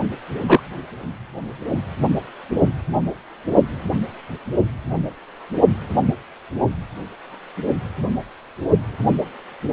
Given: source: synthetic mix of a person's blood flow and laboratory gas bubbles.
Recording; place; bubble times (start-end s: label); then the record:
Doppler ultrasound of blood flow; precordium
0.47-0.60 s: bubbles
From the record:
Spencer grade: 1 (occasional bubble signal discernible with the cardiac motion signal, with majority of cardiac periods free of bubbles); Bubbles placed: only in the low amplitude regions of the cardiac cycle